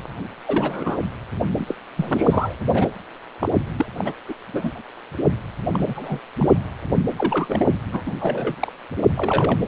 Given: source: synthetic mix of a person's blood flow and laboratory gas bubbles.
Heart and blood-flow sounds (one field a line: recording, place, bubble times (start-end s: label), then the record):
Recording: Doppler ultrasound of blood flow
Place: precordium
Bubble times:
0.43-0.98 s: bubbles
1.55-1.75 s: bubbles
1.96-2.54 s: bubbles
2.73-2.87 s: bubbles
3.41-3.48 s: bubbles
3.77-3.86 s: bubbles
4.00-4.12 s: bubbles
4.28-4.33 s: bubbles
4.52-4.71 s: bubbles
5.73-6.19 s: bubbles
6.37-6.49 s: bubbles
7.18-7.75 s: bubbles
7.92-8.03 s: bubbles
8.06-8.13 s: bubbles
8.20-8.55 s: bubbles
8.60-8.72 s: bubbles
9.18-9.58 s: bubbles
From the record:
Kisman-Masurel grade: 232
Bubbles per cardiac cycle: several, 3 to 8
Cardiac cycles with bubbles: 50 to 99%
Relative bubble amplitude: moderate (0.250 to 0.450)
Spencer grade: 3 (all of the cardiac periods contain showers or single bubble signals, but not dominating or overriding the cardiac motion signals)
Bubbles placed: anywhere in the cardiac cycle